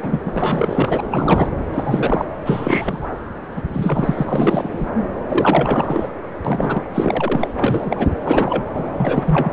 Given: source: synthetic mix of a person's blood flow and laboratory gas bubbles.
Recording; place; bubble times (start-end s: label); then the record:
Doppler ultrasound of blood flow; subclavian vein
0.01-0.20 s: bubbles
0.25-0.32 s: bubbles
0.35-1.00 s: bubbles
1.10-1.49 s: bubbles
1.73-2.25 s: bubbles
2.45-3.08 s: bubbles
3.56-3.62 s: bubbles
3.73-4.88 s: bubbles
5.26-6.09 s: bubbles
6.45-6.82 s: bubbles
6.95-7.48 s: bubbles
7.59-8.11 s: bubbles
8.24-8.63 s: bubbles
8.74-8.86 s: bubbles
8.96-9.52 s: bubbles
From the record:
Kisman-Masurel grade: 343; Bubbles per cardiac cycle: rolling drumbeat, 9 or more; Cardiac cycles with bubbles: 100%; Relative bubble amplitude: loud (0.450 to 0.775); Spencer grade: 3 (all of the cardiac periods contain showers or single bubble signals, but not dominating or overriding the cardiac motion signals); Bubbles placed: anywhere in the cardiac cycle